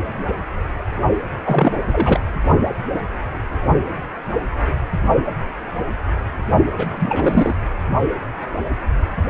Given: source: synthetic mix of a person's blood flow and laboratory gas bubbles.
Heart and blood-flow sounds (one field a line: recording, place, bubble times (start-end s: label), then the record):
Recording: Doppler ultrasound of blood flow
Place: precordium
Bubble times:
1.44-1.80 s: bubbles
1.92-2.20 s: bubbles
6.77-7.56 s: bubbles
From the record:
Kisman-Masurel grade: 222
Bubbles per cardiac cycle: several, 3 to 8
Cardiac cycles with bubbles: 10 to 50%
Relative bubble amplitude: moderate (0.250 to 0.450)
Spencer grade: 2 (many but less than half of the cardiac periods contain bubble signals, singularly or in groups)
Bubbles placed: only in the low amplitude regions of the cardiac cycle